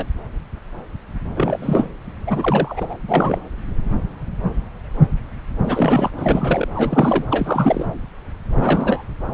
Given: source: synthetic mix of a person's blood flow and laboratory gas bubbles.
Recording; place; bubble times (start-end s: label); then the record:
Doppler ultrasound of blood flow; subclavian vein
0.00-0.05 s: bubbles
1.35-1.89 s: bubbles
2.27-2.98 s: bubbles
3.08-3.40 s: bubbles
5.62-6.11 s: bubbles
6.17-6.68 s: bubbles
6.74-7.24 s: bubbles
7.31-7.87 s: bubbles
8.59-9.04 s: bubbles
From the record:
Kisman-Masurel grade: 332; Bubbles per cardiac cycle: rolling drumbeat, 9 or more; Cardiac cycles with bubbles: 50 to 99%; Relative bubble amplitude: moderate (0.250 to 0.450); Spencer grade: 3 (all of the cardiac periods contain showers or single bubble signals, but not dominating or overriding the cardiac motion signals); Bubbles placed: anywhere in the cardiac cycle